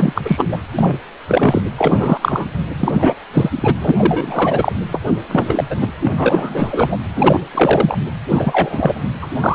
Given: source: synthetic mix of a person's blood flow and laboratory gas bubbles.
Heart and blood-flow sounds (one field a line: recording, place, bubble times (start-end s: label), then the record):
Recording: Doppler ultrasound of blood flow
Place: precordium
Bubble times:
0.00-0.21 s: bubbles
0.25-0.58 s: bubbles
0.79-0.97 s: bubbles
1.27-1.62 s: bubbles
1.77-2.18 s: bubbles
2.21-2.46 s: bubbles
2.79-3.14 s: bubbles
3.33-3.50 s: bubbles
3.56-3.75 s: bubbles
3.81-4.73 s: bubbles
4.92-4.99 s: bubbles
5.28-5.64 s: bubbles
5.70-5.91 s: bubbles
6.02-6.98 s: bubbles
7.15-7.41 s: bubbles
7.54-7.98 s: bubbles
8.30-9.10 s: bubbles
9.21-9.29 s: bubbles
9.34-9.54 s: bubbles
From the record:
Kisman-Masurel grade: 343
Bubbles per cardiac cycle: rolling drumbeat, 9 or more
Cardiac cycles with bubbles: 100%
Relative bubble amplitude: loud (0.450 to 0.775)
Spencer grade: 3 (all of the cardiac periods contain showers or single bubble signals, but not dominating or overriding the cardiac motion signals)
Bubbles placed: anywhere in the cardiac cycle